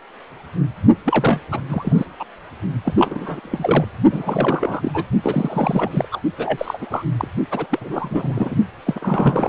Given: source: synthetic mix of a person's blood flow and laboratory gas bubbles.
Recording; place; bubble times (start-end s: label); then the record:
Doppler ultrasound of blood flow; precordium
1.04-1.40 s: bubbles
1.52-1.61 s: bubbles
1.68-2.06 s: bubbles
2.19-2.24 s: bubbles
2.85-3.40 s: bubbles
3.42-3.85 s: bubbles
4.11-5.04 s: bubbles
5.23-6.08 s: bubbles
6.12-6.20 s: bubbles
6.38-6.78 s: bubbles
6.81-6.87 s: bubbles
6.89-7.04 s: bubbles
7.17-7.28 s: bubbles
7.50-7.67 s: bubbles
7.69-8.55 s: bubbles
8.87-9.48 s: bubbles
From the record:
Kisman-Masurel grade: 332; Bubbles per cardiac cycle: rolling drumbeat, 9 or more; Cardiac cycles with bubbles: 50 to 99%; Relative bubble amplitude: moderate (0.250 to 0.450); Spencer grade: 3 (all of the cardiac periods contain showers or single bubble signals, but not dominating or overriding the cardiac motion signals); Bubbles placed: only in the low amplitude regions of the cardiac cycle